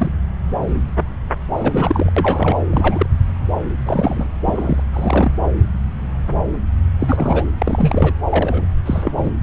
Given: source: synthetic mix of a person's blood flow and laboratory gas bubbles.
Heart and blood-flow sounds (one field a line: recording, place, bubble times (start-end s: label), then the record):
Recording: Doppler ultrasound of blood flow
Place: subclavian vein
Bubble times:
0.00-0.11 s: bubbles
1.55-2.12 s: bubbles
2.17-2.56 s: bubbles
2.70-3.06 s: bubbles
3.85-4.26 s: bubbles
4.45-4.83 s: bubbles
4.93-5.31 s: bubbles
7.00-7.45 s: bubbles
7.58-8.14 s: bubbles
8.29-8.67 s: bubbles
8.86-9.12 s: bubbles
9.18-9.31 s: bubbles
From the record:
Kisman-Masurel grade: 232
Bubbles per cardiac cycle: several, 3 to 8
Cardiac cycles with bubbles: 50 to 99%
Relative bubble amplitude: moderate (0.250 to 0.450)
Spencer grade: 3 (all of the cardiac periods contain showers or single bubble signals, but not dominating or overriding the cardiac motion signals)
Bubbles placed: anywhere in the cardiac cycle